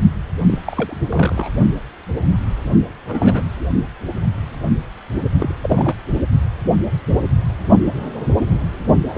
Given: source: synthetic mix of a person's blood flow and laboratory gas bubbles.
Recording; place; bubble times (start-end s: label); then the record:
Doppler ultrasound of blood flow; precordium
0.47-0.59 s: bubbles
0.66-0.95 s: bubbles
1.11-1.50 s: bubbles
3.07-3.44 s: bubbles
5.39-5.54 s: bubbles
5.62-5.95 s: bubbles
9.09-9.18 s: bubbles
From the record:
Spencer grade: 3 (all of the cardiac periods contain showers or single bubble signals, but not dominating or overriding the cardiac motion signals); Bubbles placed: only in the low amplitude regions of the cardiac cycle